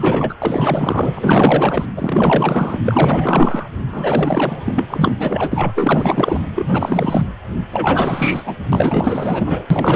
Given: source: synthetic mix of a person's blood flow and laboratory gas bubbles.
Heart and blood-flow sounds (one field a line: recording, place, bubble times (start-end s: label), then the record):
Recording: Doppler ultrasound of blood flow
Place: precordium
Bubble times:
0.00-0.35 s: bubbles
0.42-1.85 s: bubbles
1.97-2.79 s: bubbles
2.85-3.69 s: bubbles
3.92-4.84 s: bubbles
4.90-5.14 s: bubbles
5.17-5.72 s: bubbles
5.75-6.39 s: bubbles
6.54-7.29 s: bubbles
7.71-8.43 s: bubbles
8.46-8.56 s: bubbles
8.72-9.66 s: bubbles
9.70-9.96 s: bubbles
From the record:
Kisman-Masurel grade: 444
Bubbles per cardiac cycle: continuous sound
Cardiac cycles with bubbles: 100%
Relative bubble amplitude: maximal (0.775 to 0.999)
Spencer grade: 4 (maximum detectable bubble signal sounding continuously throughout systole and diastole of every cardiac period, and overriding the amplitude of the normal cardiac signals)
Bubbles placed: anywhere in the cardiac cycle